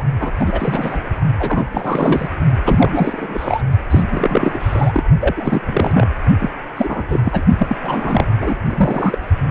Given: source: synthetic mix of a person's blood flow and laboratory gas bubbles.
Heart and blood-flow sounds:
Doppler ultrasound of blood flow; precordium
0.00-0.03 s: bubbles
0.20-0.33 s: bubbles
0.39-0.99 s: bubbles
1.39-1.65 s: bubbles
1.71-2.35 s: bubbles
2.65-3.62 s: bubbles
3.90-4.03 s: bubbles
4.11-5.04 s: bubbles
5.19-5.61 s: bubbles
5.66-6.07 s: bubbles
6.39-6.50 s: bubbles
6.76-7.21 s: bubbles
7.25-7.43 s: bubbles
7.58-7.77 s: bubbles
7.83-8.26 s: bubbles
8.40-8.54 s: bubbles
8.66-9.18 s: bubbles
9.49-9.51 s: bubbles
From the record:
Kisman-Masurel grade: 343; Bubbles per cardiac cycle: rolling drumbeat, 9 or more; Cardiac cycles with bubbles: 100%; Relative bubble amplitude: loud (0.450 to 0.775); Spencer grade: 3 (all of the cardiac periods contain showers or single bubble signals, but not dominating or overriding the cardiac motion signals); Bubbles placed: only in the low amplitude regions of the cardiac cycle

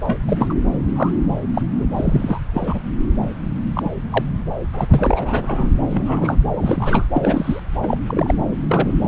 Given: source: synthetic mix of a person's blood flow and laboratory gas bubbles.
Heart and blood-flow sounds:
Doppler ultrasound of blood flow; subclavian vein
0.07-0.18 s: bubbles
0.27-0.54 s: bubbles
0.96-1.10 s: bubbles
1.54-1.61 s: bubbles
1.77-1.87 s: bubbles
1.94-2.40 s: bubbles
2.54-2.79 s: bubbles
3.74-3.91 s: bubbles
4.11-4.24 s: bubbles
4.73-4.87 s: bubbles
4.89-5.70 s: bubbles
5.92-6.36 s: bubbles
6.55-7.07 s: bubbles
7.12-7.60 s: bubbles
7.82-7.97 s: bubbles
8.06-8.35 s: bubbles
8.69-8.92 s: bubbles
8.98-9.08 s: bubbles
From the record:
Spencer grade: 3 (all of the cardiac periods contain showers or single bubble signals, but not dominating or overriding the cardiac motion signals); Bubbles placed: anywhere in the cardiac cycle

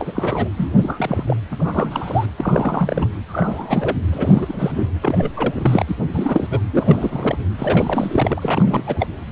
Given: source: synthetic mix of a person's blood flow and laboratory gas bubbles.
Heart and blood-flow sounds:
Doppler ultrasound of blood flow; precordium
0.00-0.49 s: bubbles
0.56-1.23 s: bubbles
1.27-1.36 s: bubbles
1.51-2.26 s: bubbles
2.37-3.08 s: bubbles
3.26-3.96 s: bubbles
4.12-4.88 s: bubbles
5.00-5.84 s: bubbles
5.87-5.96 s: bubbles
6.13-6.61 s: bubbles
6.71-7.38 s: bubbles
7.57-9.06 s: bubbles
From the record:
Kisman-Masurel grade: 342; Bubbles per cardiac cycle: rolling drumbeat, 9 or more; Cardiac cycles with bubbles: 100%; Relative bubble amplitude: moderate (0.250 to 0.450); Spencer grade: 3 (all of the cardiac periods contain showers or single bubble signals, but not dominating or overriding the cardiac motion signals); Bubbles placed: anywhere in the cardiac cycle

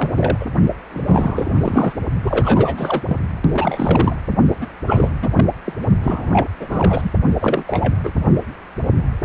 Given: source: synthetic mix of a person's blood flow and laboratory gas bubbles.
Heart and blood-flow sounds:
Doppler ultrasound of blood flow; precordium
0.00-0.09 s: bubbles
0.16-0.45 s: bubbles
0.93-1.51 s: bubbles
1.57-1.92 s: bubbles
2.23-3.03 s: bubbles
3.07-3.17 s: bubbles
3.54-4.22 s: bubbles
4.61-4.68 s: bubbles
4.85-5.10 s: bubbles
5.21-5.29 s: bubbles
5.36-5.45 s: bubbles
5.65-5.72 s: bubbles
6.03-6.48 s: bubbles
6.60-7.11 s: bubbles
7.40-7.94 s: bubbles
8.03-8.12 s: bubbles
From the record:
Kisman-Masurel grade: 332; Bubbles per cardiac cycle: rolling drumbeat, 9 or more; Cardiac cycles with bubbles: 50 to 99%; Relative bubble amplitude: moderate (0.250 to 0.450); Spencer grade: 3 (all of the cardiac periods contain showers or single bubble signals, but not dominating or overriding the cardiac motion signals); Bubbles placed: only in the low amplitude regions of the cardiac cycle

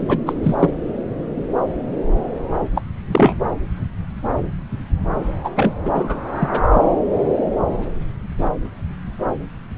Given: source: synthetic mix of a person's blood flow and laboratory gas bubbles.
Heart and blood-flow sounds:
Doppler ultrasound of blood flow; subclavian vein
0.09-0.17 s: bubbles
0.26-0.33 s: bubbles
0.43-0.54 s: bubbles
0.59-0.73 s: bubbles
2.75-2.82 s: bubbles
3.12-3.35 s: bubbles
5.44-5.50 s: bubbles
5.55-5.75 s: bubbles
5.85-5.91 s: bubbles
5.94-6.21 s: bubbles
6.39-6.49 s: bubbles
6.51-6.61 s: bubbles
6.74-6.80 s: bubbles
From the record:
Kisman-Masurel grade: 223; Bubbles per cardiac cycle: several, 3 to 8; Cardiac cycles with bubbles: 10 to 50%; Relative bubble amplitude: loud (0.450 to 0.775); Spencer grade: 2 (many but less than half of the cardiac periods contain bubble signals, singularly or in groups); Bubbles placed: anywhere in the cardiac cycle

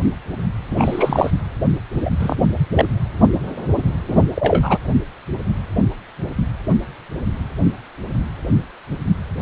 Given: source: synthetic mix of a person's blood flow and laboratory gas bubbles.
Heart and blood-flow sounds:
Doppler ultrasound of blood flow; precordium
0.70-1.31 s: bubbles
2.04-2.10 s: bubbles
2.19-2.35 s: bubbles
2.75-2.85 s: bubbles
4.08-4.24 s: bubbles
4.34-4.78 s: bubbles
From the record:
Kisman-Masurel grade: 223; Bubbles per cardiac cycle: several, 3 to 8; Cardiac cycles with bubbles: 10 to 50%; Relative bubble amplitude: loud (0.450 to 0.775); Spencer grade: 2 (many but less than half of the cardiac periods contain bubble signals, singularly or in groups); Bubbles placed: anywhere in the cardiac cycle

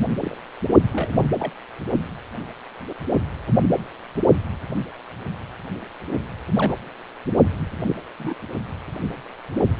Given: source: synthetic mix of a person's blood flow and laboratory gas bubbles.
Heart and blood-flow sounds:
Doppler ultrasound of blood flow; precordium
0.20-0.38 s: bubbles
0.92-1.29 s: bubbles
1.39-1.53 s: bubbles
6.58-6.74 s: bubbles
7.86-7.96 s: bubbles
8.18-8.35 s: bubbles
From the record:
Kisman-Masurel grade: 122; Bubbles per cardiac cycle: 1 to 2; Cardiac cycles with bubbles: 10 to 50%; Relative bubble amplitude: moderate (0.250 to 0.450); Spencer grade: 2 (many but less than half of the cardiac periods contain bubble signals, singularly or in groups); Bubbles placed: only in the low amplitude regions of the cardiac cycle

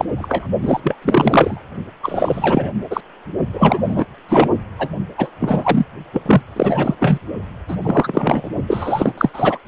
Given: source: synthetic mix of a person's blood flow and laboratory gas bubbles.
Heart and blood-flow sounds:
Doppler ultrasound of blood flow; precordium
0.00-0.05 s: bubbles
0.18-0.47 s: bubbles
0.62-0.80 s: bubbles
0.83-0.95 s: bubbles
1.02-1.60 s: bubbles
2.03-2.70 s: bubbles
2.90-3.01 s: bubbles
3.53-4.05 s: bubbles
4.29-4.49 s: bubbles
4.79-4.88 s: bubbles
5.17-5.30 s: bubbles
5.40-5.86 s: bubbles
6.13-6.21 s: bubbles
6.25-6.42 s: bubbles
6.56-6.95 s: bubbles
6.99-7.18 s: bubbles
7.67-7.76 s: bubbles
7.83-8.48 s: bubbles
8.67-9.12 s: bubbles
9.18-9.30 s: bubbles
9.33-9.58 s: bubbles
From the record:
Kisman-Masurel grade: 343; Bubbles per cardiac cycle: rolling drumbeat, 9 or more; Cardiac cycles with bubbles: 100%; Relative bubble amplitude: loud (0.450 to 0.775); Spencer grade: 3 (all of the cardiac periods contain showers or single bubble signals, but not dominating or overriding the cardiac motion signals); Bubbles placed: only in the low amplitude regions of the cardiac cycle

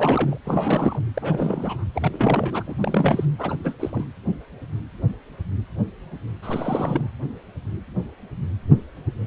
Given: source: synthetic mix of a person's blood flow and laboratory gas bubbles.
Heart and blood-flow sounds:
Doppler ultrasound of blood flow; precordium
0.00-0.38 s: bubbles
0.44-1.02 s: bubbles
1.14-1.84 s: bubbles
1.95-2.63 s: bubbles
2.66-2.75 s: bubbles
2.81-3.25 s: bubbles
3.38-3.56 s: bubbles
3.64-3.74 s: bubbles
3.80-4.04 s: bubbles
6.42-7.08 s: bubbles
From the record:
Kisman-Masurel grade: 332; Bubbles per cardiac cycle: rolling drumbeat, 9 or more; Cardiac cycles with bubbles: 50 to 99%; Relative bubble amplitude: moderate (0.250 to 0.450); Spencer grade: 3 (all of the cardiac periods contain showers or single bubble signals, but not dominating or overriding the cardiac motion signals); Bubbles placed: anywhere in the cardiac cycle

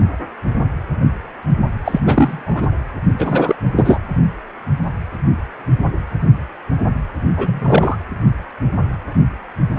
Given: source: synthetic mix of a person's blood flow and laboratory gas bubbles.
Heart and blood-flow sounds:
Doppler ultrasound of blood flow; precordium
1.84-2.00 s: bubbles
2.06-2.67 s: bubbles
3.19-3.56 s: bubbles
3.77-4.01 s: bubbles
7.37-7.96 s: bubbles
From the record:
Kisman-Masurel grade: 223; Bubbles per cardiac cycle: several, 3 to 8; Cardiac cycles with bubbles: 10 to 50%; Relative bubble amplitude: loud (0.450 to 0.775); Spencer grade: 2 (many but less than half of the cardiac periods contain bubble signals, singularly or in groups); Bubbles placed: anywhere in the cardiac cycle

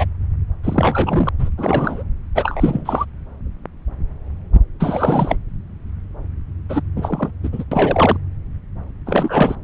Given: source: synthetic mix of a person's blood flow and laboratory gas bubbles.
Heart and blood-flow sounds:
Doppler ultrasound of blood flow; subclavian vein
0.00-0.05 s: bubbles
0.64-1.29 s: bubbles
1.38-1.50 s: bubbles
1.58-2.03 s: bubbles
2.34-3.05 s: bubbles
4.79-5.37 s: bubbles
6.69-6.83 s: bubbles
6.96-7.31 s: bubbles
7.44-7.49 s: bubbles
7.52-7.65 s: bubbles
7.72-8.16 s: bubbles
9.06-9.55 s: bubbles
From the record:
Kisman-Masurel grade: 333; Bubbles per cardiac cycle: rolling drumbeat, 9 or more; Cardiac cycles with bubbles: 50 to 99%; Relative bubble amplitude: loud (0.450 to 0.775); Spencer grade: 3 (all of the cardiac periods contain showers or single bubble signals, but not dominating or overriding the cardiac motion signals); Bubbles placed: anywhere in the cardiac cycle

